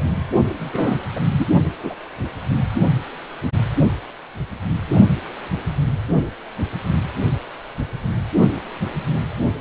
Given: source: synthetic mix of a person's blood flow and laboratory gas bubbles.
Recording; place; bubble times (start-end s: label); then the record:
Doppler ultrasound of blood flow; precordium
0.59-0.97 s: bubbles
1.15-1.19 s: bubbles
1.36-1.47 s: bubbles
1.83-1.94 s: bubbles
From the record:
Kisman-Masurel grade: 122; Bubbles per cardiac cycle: 1 to 2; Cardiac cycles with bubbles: 10 to 50%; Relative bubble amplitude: moderate (0.250 to 0.450); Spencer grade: 2 (many but less than half of the cardiac periods contain bubble signals, singularly or in groups); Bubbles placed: anywhere in the cardiac cycle